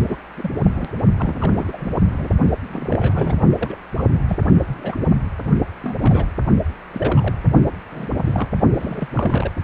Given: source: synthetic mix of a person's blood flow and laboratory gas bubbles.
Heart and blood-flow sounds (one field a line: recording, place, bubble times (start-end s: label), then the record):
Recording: Doppler ultrasound of blood flow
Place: precordium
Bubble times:
0.07-0.17 s: bubbles
0.37-0.50 s: bubbles
0.63-0.90 s: bubbles
1.18-1.93 s: bubbles
2.08-2.29 s: bubbles
2.71-3.35 s: bubbles
3.58-3.76 s: bubbles
3.96-4.04 s: bubbles
4.29-4.37 s: bubbles
4.66-4.96 s: bubbles
5.83-6.27 s: bubbles
6.91-7.33 s: bubbles
7.91-8.48 s: bubbles
8.75-9.07 s: bubbles
9.12-9.52 s: bubbles
From the record:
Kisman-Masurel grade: 242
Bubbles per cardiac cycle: several, 3 to 8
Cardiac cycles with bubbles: 100%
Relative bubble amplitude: moderate (0.250 to 0.450)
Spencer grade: 3 (all of the cardiac periods contain showers or single bubble signals, but not dominating or overriding the cardiac motion signals)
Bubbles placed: only in the low amplitude regions of the cardiac cycle